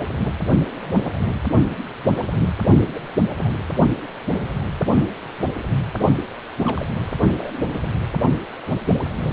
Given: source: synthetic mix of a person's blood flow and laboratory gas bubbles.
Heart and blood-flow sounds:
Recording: Doppler ultrasound of blood flow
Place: precordium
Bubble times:
1.16-1.19 s: bubbles
2.94-3.01 s: bubbles
3.39-3.57 s: bubbles
6.63-6.85 s: bubbles
7.38-7.52 s: bubbles
From the record:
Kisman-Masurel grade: 121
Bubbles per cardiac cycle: 1 to 2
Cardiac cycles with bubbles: 10 to 50%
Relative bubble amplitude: barely perceptible (0.100 to 0.250)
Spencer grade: 2 (many but less than half of the cardiac periods contain bubble signals, singularly or in groups)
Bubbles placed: only in the low amplitude regions of the cardiac cycle

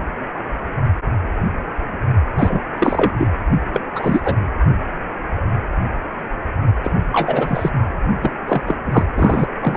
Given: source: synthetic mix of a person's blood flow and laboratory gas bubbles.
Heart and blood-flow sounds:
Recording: Doppler ultrasound of blood flow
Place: precordium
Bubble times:
2.33-2.60 s: bubbles
2.79-3.12 s: bubbles
3.17-3.28 s: bubbles
3.73-3.80 s: bubbles
3.95-4.36 s: bubbles
6.83-6.91 s: bubbles
7.12-7.71 s: bubbles
8.22-8.30 s: bubbles
8.47-8.62 s: bubbles
8.66-8.77 s: bubbles
8.86-9.05 s: bubbles
9.15-9.47 s: bubbles
9.61-9.77 s: bubbles
From the record:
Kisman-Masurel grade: 233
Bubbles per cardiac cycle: several, 3 to 8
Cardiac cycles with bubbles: 50 to 99%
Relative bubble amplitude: loud (0.450 to 0.775)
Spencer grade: 3 (all of the cardiac periods contain showers or single bubble signals, but not dominating or overriding the cardiac motion signals)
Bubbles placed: anywhere in the cardiac cycle

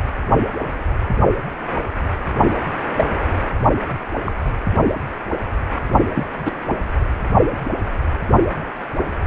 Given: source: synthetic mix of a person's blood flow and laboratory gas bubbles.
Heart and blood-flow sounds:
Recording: Doppler ultrasound of blood flow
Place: precordium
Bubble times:
2.96-3.05 s: bubbles
4.25-4.32 s: bubbles
6.14-6.26 s: bubbles
6.45-6.52 s: bubbles
From the record:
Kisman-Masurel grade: 122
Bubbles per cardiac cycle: 1 to 2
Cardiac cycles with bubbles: 10 to 50%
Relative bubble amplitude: moderate (0.250 to 0.450)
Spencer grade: 2 (many but less than half of the cardiac periods contain bubble signals, singularly or in groups)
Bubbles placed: only in the low amplitude regions of the cardiac cycle

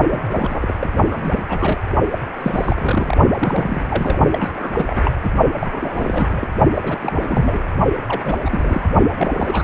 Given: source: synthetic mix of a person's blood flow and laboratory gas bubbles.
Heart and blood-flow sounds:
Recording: Doppler ultrasound of blood flow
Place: precordium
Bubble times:
0.11-0.73 s: bubbles
0.80-0.88 s: bubbles
1.09-1.42 s: bubbles
1.49-1.77 s: bubbles
2.11-2.19 s: bubbles
2.39-3.17 s: bubbles
3.38-4.17 s: bubbles
4.33-4.71 s: bubbles
4.77-5.01 s: bubbles
5.04-5.11 s: bubbles
5.22-5.29 s: bubbles
5.61-6.48 s: bubbles
6.74-6.97 s: bubbles
7.00-7.68 s: bubbles
8.08-8.21 s: bubbles
8.24-8.39 s: bubbles
8.45-8.88 s: bubbles
9.17-9.64 s: bubbles
From the record:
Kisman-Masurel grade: 342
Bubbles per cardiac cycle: rolling drumbeat, 9 or more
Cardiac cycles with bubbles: 100%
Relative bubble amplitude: moderate (0.250 to 0.450)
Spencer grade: 3 (all of the cardiac periods contain showers or single bubble signals, but not dominating or overriding the cardiac motion signals)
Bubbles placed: only in the low amplitude regions of the cardiac cycle

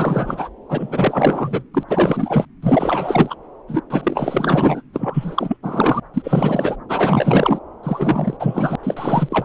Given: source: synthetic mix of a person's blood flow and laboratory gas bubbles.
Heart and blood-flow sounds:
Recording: Doppler ultrasound of blood flow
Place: subclavian vein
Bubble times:
0.00-0.49 s: bubbles
0.69-1.64 s: bubbles
1.73-1.83 s: bubbles
1.88-2.45 s: bubbles
2.62-3.36 s: bubbles
3.67-3.81 s: bubbles
3.90-4.83 s: bubbles
4.94-5.57 s: bubbles
5.62-6.00 s: bubbles
6.14-6.76 s: bubbles
6.89-7.58 s: bubbles
7.83-8.37 s: bubbles
8.39-8.75 s: bubbles
8.83-9.45 s: bubbles
From the record:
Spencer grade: 4 (maximum detectable bubble signal sounding continuously throughout systole and diastole of every cardiac period, and overriding the amplitude of the normal cardiac signals)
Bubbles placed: anywhere in the cardiac cycle

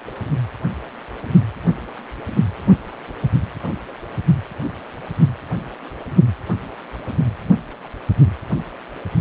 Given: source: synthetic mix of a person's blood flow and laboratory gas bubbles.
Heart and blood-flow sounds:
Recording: Doppler ultrasound of blood flow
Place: precordium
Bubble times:
no bubbles
From the record:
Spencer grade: 0 (complete lack of bubble signals)

